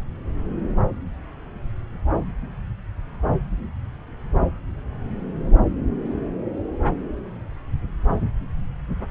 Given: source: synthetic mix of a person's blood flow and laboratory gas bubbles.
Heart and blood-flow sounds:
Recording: Doppler ultrasound of blood flow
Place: subclavian vein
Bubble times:
no bubbles
From the record:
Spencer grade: 0 (complete lack of bubble signals)

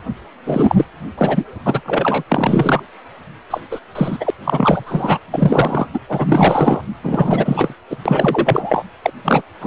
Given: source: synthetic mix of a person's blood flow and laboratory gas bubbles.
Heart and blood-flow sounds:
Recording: Doppler ultrasound of blood flow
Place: precordium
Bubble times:
0.45-0.85 s: bubbles
1.18-1.45 s: bubbles
1.66-1.80 s: bubbles
1.85-2.23 s: bubbles
2.29-2.83 s: bubbles
3.50-3.60 s: bubbles
3.71-3.80 s: bubbles
3.95-4.30 s: bubbles
4.44-5.18 s: bubbles
5.31-5.86 s: bubbles
5.93-5.99 s: bubbles
6.08-6.81 s: bubbles
7.02-7.74 s: bubbles
7.89-7.96 s: bubbles
8.06-8.85 s: bubbles
9.02-9.11 s: bubbles
9.24-9.43 s: bubbles
9.61-9.67 s: bubbles
From the record:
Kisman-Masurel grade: 343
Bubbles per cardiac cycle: rolling drumbeat, 9 or more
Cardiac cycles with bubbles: 100%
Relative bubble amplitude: loud (0.450 to 0.775)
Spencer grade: 3 (all of the cardiac periods contain showers or single bubble signals, but not dominating or overriding the cardiac motion signals)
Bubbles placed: anywhere in the cardiac cycle

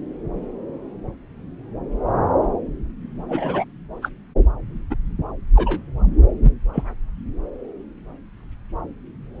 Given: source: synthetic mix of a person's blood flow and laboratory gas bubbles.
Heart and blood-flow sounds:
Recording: Doppler ultrasound of blood flow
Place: subclavian vein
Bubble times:
3.28-3.65 s: bubbles
4.02-4.09 s: bubbles
4.90-4.95 s: bubbles
5.55-5.80 s: bubbles
6.73-6.84 s: bubbles
From the record:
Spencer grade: 2 (many but less than half of the cardiac periods contain bubble signals, singularly or in groups)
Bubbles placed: anywhere in the cardiac cycle

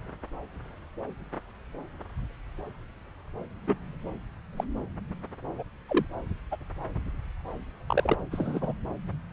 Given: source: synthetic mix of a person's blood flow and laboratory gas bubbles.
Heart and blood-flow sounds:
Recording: Doppler ultrasound of blood flow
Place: subclavian vein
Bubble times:
3.67-3.76 s: bubbles
4.57-4.63 s: bubbles
5.56-5.63 s: bubbles
5.88-6.05 s: bubbles
6.51-6.57 s: bubbles
7.88-8.14 s: bubbles
8.31-8.73 s: bubbles
From the record:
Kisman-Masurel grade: 121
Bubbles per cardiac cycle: 1 to 2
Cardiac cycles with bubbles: 10 to 50%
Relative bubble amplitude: barely perceptible (0.100 to 0.250)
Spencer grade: 2 (many but less than half of the cardiac periods contain bubble signals, singularly or in groups)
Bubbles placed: anywhere in the cardiac cycle

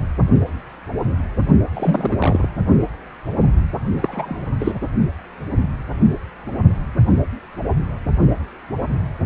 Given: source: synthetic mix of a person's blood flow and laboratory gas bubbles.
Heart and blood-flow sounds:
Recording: Doppler ultrasound of blood flow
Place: precordium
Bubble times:
1.74-2.17 s: bubbles
2.20-2.48 s: bubbles
4.01-4.43 s: bubbles
4.60-4.72 s: bubbles
From the record:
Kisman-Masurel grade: 222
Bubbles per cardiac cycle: several, 3 to 8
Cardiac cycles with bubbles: 10 to 50%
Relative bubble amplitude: moderate (0.250 to 0.450)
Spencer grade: 2 (many but less than half of the cardiac periods contain bubble signals, singularly or in groups)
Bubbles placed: only in the low amplitude regions of the cardiac cycle

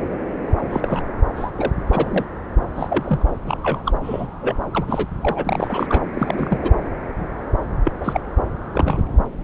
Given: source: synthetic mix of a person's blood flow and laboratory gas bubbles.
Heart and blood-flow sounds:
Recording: Doppler ultrasound of blood flow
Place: subclavian vein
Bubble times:
0.69-1.02 s: bubbles
1.36-1.52 s: bubbles
1.57-1.72 s: bubbles
1.91-2.25 s: bubbles
2.75-3.25 s: bubbles
3.47-3.57 s: bubbles
3.62-3.82 s: bubbles
3.85-3.92 s: bubbles
4.04-4.26 s: bubbles
4.41-4.58 s: bubbles
4.72-4.85 s: bubbles
4.88-5.07 s: bubbles
5.21-6.04 s: bubbles
6.13-6.58 s: bubbles
6.62-6.71 s: bubbles
7.85-7.91 s: bubbles
7.99-8.21 s: bubbles
8.71-9.02 s: bubbles
From the record:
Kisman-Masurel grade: 232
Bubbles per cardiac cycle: several, 3 to 8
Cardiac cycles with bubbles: 50 to 99%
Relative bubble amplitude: moderate (0.250 to 0.450)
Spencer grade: 3 (all of the cardiac periods contain showers or single bubble signals, but not dominating or overriding the cardiac motion signals)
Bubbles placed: anywhere in the cardiac cycle

